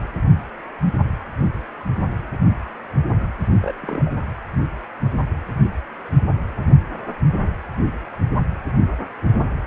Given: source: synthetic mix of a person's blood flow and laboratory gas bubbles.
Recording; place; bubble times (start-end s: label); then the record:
Doppler ultrasound of blood flow; precordium
3.62-3.75 s: bubbles
3.82-4.11 s: bubbles
From the record:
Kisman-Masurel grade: 211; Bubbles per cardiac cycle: several, 3 to 8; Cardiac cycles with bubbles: 1 to 10%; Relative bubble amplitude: barely perceptible (0.100 to 0.250); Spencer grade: 1 (occasional bubble signal discernible with the cardiac motion signal, with majority of cardiac periods free of bubbles); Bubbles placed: anywhere in the cardiac cycle